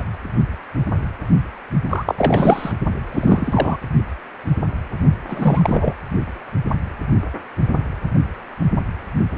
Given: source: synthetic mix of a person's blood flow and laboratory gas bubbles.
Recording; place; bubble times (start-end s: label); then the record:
Doppler ultrasound of blood flow; precordium
0.00-0.03 s: bubbles
1.90-2.15 s: bubbles
2.17-2.73 s: bubbles
3.11-3.78 s: bubbles
5.29-5.94 s: bubbles
9.31-9.38 s: bubbles
From the record:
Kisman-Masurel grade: 223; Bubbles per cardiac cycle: several, 3 to 8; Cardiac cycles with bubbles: 10 to 50%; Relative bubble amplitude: loud (0.450 to 0.775); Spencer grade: 2 (many but less than half of the cardiac periods contain bubble signals, singularly or in groups); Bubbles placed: only in the low amplitude regions of the cardiac cycle